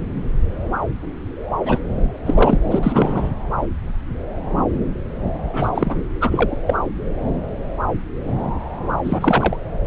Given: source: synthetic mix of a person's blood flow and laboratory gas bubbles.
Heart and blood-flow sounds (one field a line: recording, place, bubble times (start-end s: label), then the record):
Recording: Doppler ultrasound of blood flow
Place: subclavian vein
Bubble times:
1.65-1.78 s: bubbles
2.25-2.57 s: bubbles
2.71-2.79 s: bubbles
2.82-3.32 s: bubbles
5.53-5.95 s: bubbles
6.21-6.58 s: bubbles
6.67-6.82 s: bubbles
9.04-9.57 s: bubbles
From the record:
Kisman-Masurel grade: 223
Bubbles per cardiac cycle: several, 3 to 8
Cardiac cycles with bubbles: 10 to 50%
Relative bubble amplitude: loud (0.450 to 0.775)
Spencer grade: 2 (many but less than half of the cardiac periods contain bubble signals, singularly or in groups)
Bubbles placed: anywhere in the cardiac cycle